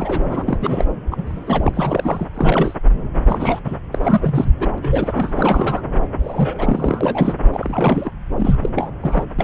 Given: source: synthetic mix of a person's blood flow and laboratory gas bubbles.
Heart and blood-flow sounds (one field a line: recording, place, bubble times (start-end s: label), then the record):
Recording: Doppler ultrasound of blood flow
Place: subclavian vein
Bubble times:
0.00-0.24 s: bubbles
0.28-0.90 s: bubbles
1.11-1.23 s: bubbles
1.27-2.27 s: bubbles
2.34-2.75 s: bubbles
3.27-3.60 s: bubbles
3.64-3.75 s: bubbles
3.92-3.98 s: bubbles
4.03-4.49 s: bubbles
4.60-4.67 s: bubbles
4.78-5.81 s: bubbles
6.23-7.34 s: bubbles
7.52-8.11 s: bubbles
8.38-8.59 s: bubbles
8.63-8.70 s: bubbles
8.76-8.91 s: bubbles
9.03-9.24 s: bubbles
9.38-9.44 s: bubbles
From the record:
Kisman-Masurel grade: 342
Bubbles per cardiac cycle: rolling drumbeat, 9 or more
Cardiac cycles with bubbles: 100%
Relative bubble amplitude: moderate (0.250 to 0.450)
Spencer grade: 3 (all of the cardiac periods contain showers or single bubble signals, but not dominating or overriding the cardiac motion signals)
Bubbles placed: anywhere in the cardiac cycle